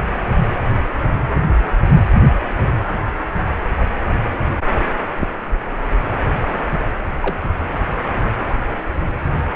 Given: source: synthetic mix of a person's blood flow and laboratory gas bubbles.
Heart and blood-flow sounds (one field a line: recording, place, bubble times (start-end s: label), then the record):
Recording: Doppler ultrasound of blood flow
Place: precordium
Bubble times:
7.21-7.50 s: bubbles
From the record:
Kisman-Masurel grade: 112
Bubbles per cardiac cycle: 1 to 2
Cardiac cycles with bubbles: 1 to 10%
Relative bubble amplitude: moderate (0.250 to 0.450)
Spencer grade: 1 (occasional bubble signal discernible with the cardiac motion signal, with majority of cardiac periods free of bubbles)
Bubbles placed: anywhere in the cardiac cycle